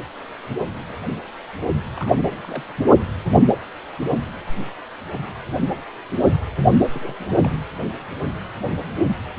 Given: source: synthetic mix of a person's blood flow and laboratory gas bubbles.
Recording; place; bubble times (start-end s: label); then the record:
Doppler ultrasound of blood flow; precordium
1.96-2.15 s: bubbles
2.43-2.63 s: bubbles
6.94-7.17 s: bubbles
7.20-7.34 s: bubbles
7.43-7.58 s: bubbles
From the record:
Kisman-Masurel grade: 221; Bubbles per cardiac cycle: several, 3 to 8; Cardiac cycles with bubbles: 10 to 50%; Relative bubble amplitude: barely perceptible (0.100 to 0.250); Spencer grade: 2 (many but less than half of the cardiac periods contain bubble signals, singularly or in groups); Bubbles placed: only in the low amplitude regions of the cardiac cycle